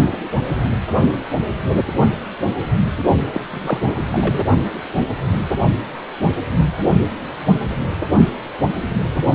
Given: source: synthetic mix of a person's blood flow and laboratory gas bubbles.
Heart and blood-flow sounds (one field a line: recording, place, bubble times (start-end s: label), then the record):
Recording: Doppler ultrasound of blood flow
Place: precordium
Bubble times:
3.33-3.40 s: bubbles
3.50-3.97 s: bubbles
4.12-4.44 s: bubbles
From the record:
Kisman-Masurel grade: 222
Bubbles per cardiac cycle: several, 3 to 8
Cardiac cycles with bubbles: 10 to 50%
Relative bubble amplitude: moderate (0.250 to 0.450)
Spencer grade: 2 (many but less than half of the cardiac periods contain bubble signals, singularly or in groups)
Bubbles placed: only in the low amplitude regions of the cardiac cycle